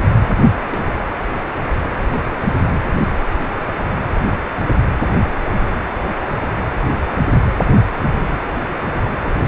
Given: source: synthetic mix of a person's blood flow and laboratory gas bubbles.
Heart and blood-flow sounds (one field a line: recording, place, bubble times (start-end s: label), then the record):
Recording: Doppler ultrasound of blood flow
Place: precordium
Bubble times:
0.71-0.79 s: bubbles
9.23-9.34 s: bubbles
From the record:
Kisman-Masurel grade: 121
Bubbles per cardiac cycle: 1 to 2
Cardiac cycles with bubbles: 10 to 50%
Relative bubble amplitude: barely perceptible (0.100 to 0.250)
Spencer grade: 2 (many but less than half of the cardiac periods contain bubble signals, singularly or in groups)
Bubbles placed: anywhere in the cardiac cycle